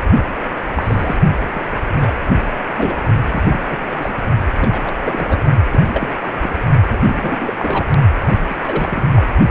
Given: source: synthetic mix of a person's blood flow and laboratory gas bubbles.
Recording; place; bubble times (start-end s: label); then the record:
Doppler ultrasound of blood flow; precordium
0.14-0.29 s: bubbles
0.77-1.17 s: bubbles
1.53-1.62 s: bubbles
1.97-2.12 s: bubbles
2.75-2.95 s: bubbles
3.31-3.66 s: bubbles
3.69-3.77 s: bubbles
3.90-4.21 s: bubbles
4.59-4.94 s: bubbles
5.00-5.42 s: bubbles
5.71-6.14 s: bubbles
6.21-6.62 s: bubbles
6.90-7.57 s: bubbles
7.59-7.85 s: bubbles
8.21-8.57 s: bubbles
8.63-9.02 s: bubbles
9.14-9.22 s: bubbles
From the record:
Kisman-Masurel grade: 232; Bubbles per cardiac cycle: several, 3 to 8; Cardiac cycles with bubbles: 50 to 99%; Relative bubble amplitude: moderate (0.250 to 0.450); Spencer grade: 3 (all of the cardiac periods contain showers or single bubble signals, but not dominating or overriding the cardiac motion signals); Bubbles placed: only in the low amplitude regions of the cardiac cycle